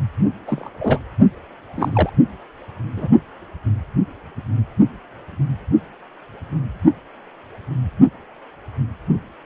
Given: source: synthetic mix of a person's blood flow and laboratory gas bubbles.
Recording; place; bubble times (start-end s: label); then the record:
Doppler ultrasound of blood flow; precordium
0.47-0.70 s: bubbles
0.79-0.99 s: bubbles
1.76-2.09 s: bubbles
2.96-3.07 s: bubbles
From the record:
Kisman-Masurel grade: 222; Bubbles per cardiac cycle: several, 3 to 8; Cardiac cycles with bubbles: 10 to 50%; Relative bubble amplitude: moderate (0.250 to 0.450); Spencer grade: 2 (many but less than half of the cardiac periods contain bubble signals, singularly or in groups); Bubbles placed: only in the low amplitude regions of the cardiac cycle